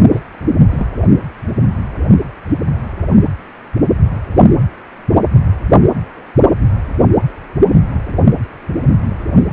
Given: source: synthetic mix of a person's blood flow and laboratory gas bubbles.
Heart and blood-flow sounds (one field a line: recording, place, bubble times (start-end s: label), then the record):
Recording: Doppler ultrasound of blood flow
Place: precordium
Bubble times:
0.10-0.20 s: bubbles
0.70-0.86 s: bubbles
From the record:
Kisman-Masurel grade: 112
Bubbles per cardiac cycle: 1 to 2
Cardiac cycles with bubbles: 1 to 10%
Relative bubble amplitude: moderate (0.250 to 0.450)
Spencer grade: 1 (occasional bubble signal discernible with the cardiac motion signal, with majority of cardiac periods free of bubbles)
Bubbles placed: anywhere in the cardiac cycle